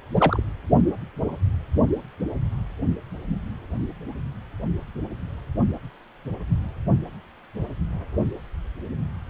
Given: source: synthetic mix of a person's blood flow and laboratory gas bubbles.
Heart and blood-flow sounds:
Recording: Doppler ultrasound of blood flow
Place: precordium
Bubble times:
0.15-0.42 s: bubbles
From the record:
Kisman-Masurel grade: 112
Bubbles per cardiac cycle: 1 to 2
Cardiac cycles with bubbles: 1 to 10%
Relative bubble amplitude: moderate (0.250 to 0.450)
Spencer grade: 1 (occasional bubble signal discernible with the cardiac motion signal, with majority of cardiac periods free of bubbles)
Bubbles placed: only in the low amplitude regions of the cardiac cycle

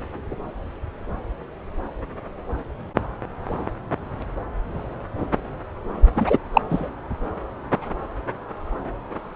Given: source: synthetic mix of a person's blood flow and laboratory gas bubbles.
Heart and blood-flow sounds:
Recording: Doppler ultrasound of blood flow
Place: subclavian vein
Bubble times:
6.16-6.38 s: bubbles
6.53-6.62 s: bubbles
6.70-6.90 s: bubbles
From the record:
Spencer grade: 1 (occasional bubble signal discernible with the cardiac motion signal, with majority of cardiac periods free of bubbles)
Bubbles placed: anywhere in the cardiac cycle

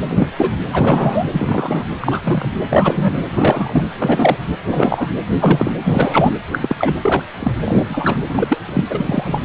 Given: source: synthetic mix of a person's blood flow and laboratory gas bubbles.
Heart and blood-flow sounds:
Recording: Doppler ultrasound of blood flow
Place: precordium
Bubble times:
0.09-0.28 s: bubbles
0.37-0.52 s: bubbles
0.72-1.25 s: bubbles
1.31-1.84 s: bubbles
2.00-2.52 s: bubbles
2.70-3.25 s: bubbles
3.31-3.83 s: bubbles
3.98-4.36 s: bubbles
4.69-5.18 s: bubbles
5.40-5.72 s: bubbles
5.84-6.32 s: bubbles
6.51-6.59 s: bubbles
6.62-6.96 s: bubbles
7.01-7.23 s: bubbles
7.40-7.51 s: bubbles
7.65-7.84 s: bubbles
7.87-8.24 s: bubbles
8.29-8.58 s: bubbles
8.66-8.84 s: bubbles
8.90-9.41 s: bubbles
From the record:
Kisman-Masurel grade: 243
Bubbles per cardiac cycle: several, 3 to 8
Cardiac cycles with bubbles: 100%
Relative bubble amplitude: loud (0.450 to 0.775)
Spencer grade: 3 (all of the cardiac periods contain showers or single bubble signals, but not dominating or overriding the cardiac motion signals)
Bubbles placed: anywhere in the cardiac cycle

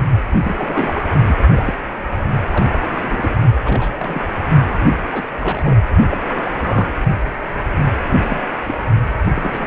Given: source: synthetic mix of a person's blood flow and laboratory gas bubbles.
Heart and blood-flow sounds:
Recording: Doppler ultrasound of blood flow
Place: precordium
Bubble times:
0.30-0.39 s: bubbles
0.43-1.02 s: bubbles
1.27-1.35 s: bubbles
1.54-1.74 s: bubbles
2.52-2.65 s: bubbles
2.71-2.79 s: bubbles
2.89-3.35 s: bubbles
3.65-3.96 s: bubbles
3.99-4.21 s: bubbles
5.12-5.26 s: bubbles
5.41-5.78 s: bubbles
6.11-6.17 s: bubbles
6.28-6.50 s: bubbles
6.57-6.88 s: bubbles
8.28-8.41 s: bubbles
8.66-8.75 s: bubbles
9.35-9.67 s: bubbles
From the record:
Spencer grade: 3 (all of the cardiac periods contain showers or single bubble signals, but not dominating or overriding the cardiac motion signals)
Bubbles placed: only in the low amplitude regions of the cardiac cycle

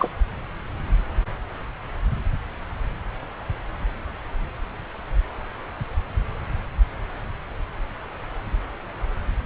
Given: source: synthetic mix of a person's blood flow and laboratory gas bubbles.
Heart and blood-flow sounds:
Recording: Doppler ultrasound of blood flow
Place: subclavian vein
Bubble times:
0.00-0.11 s: bubbles
From the record:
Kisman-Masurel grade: 213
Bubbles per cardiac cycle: several, 3 to 8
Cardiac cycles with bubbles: 1 to 10%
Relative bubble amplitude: loud (0.450 to 0.775)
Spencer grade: 1 (occasional bubble signal discernible with the cardiac motion signal, with majority of cardiac periods free of bubbles)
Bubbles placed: anywhere in the cardiac cycle

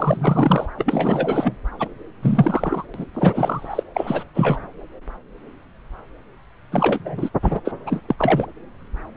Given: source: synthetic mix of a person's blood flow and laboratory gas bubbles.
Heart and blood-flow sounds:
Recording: Doppler ultrasound of blood flow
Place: subclavian vein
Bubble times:
0.00-0.67 s: bubbles
0.78-1.56 s: bubbles
1.79-1.89 s: bubbles
2.21-2.85 s: bubbles
2.94-3.04 s: bubbles
3.14-3.83 s: bubbles
3.94-4.24 s: bubbles
4.34-4.61 s: bubbles
6.71-7.30 s: bubbles
7.42-7.60 s: bubbles
7.65-7.73 s: bubbles
7.86-8.03 s: bubbles
8.08-8.46 s: bubbles
From the record:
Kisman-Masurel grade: 333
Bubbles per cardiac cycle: rolling drumbeat, 9 or more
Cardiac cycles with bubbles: 50 to 99%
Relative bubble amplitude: loud (0.450 to 0.775)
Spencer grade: 3 (all of the cardiac periods contain showers or single bubble signals, but not dominating or overriding the cardiac motion signals)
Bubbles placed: anywhere in the cardiac cycle

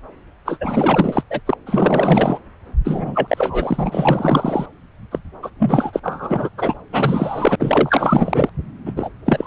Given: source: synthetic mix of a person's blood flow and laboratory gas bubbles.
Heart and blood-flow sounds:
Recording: Doppler ultrasound of blood flow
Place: subclavian vein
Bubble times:
0.45-1.24 s: bubbles
1.30-1.41 s: bubbles
1.46-1.54 s: bubbles
1.66-2.39 s: bubbles
2.85-4.66 s: bubbles
5.11-5.19 s: bubbles
5.42-5.50 s: bubbles
5.59-6.49 s: bubbles
6.54-6.76 s: bubbles
6.89-7.55 s: bubbles
7.59-8.49 s: bubbles
8.85-9.10 s: bubbles
9.26-9.47 s: bubbles
From the record:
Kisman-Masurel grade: 444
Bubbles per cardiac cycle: continuous sound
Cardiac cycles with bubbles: 100%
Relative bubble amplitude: maximal (0.775 to 0.999)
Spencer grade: 4 (maximum detectable bubble signal sounding continuously throughout systole and diastole of every cardiac period, and overriding the amplitude of the normal cardiac signals)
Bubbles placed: anywhere in the cardiac cycle

